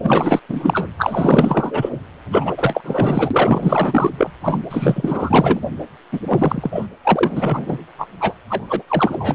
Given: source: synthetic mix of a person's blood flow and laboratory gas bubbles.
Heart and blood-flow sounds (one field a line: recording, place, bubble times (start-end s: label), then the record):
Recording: Doppler ultrasound of blood flow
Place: precordium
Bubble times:
0.03-0.40 s: bubbles
0.48-0.88 s: bubbles
0.97-1.90 s: bubbles
2.31-2.54 s: bubbles
2.57-2.80 s: bubbles
2.83-4.11 s: bubbles
4.18-4.32 s: bubbles
4.43-4.62 s: bubbles
4.70-5.60 s: bubbles
6.12-6.20 s: bubbles
6.25-6.88 s: bubbles
7.03-7.78 s: bubbles
7.99-8.07 s: bubbles
8.20-8.34 s: bubbles
8.48-8.83 s: bubbles
8.88-9.35 s: bubbles
From the record:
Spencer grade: 4 (maximum detectable bubble signal sounding continuously throughout systole and diastole of every cardiac period, and overriding the amplitude of the normal cardiac signals)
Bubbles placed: anywhere in the cardiac cycle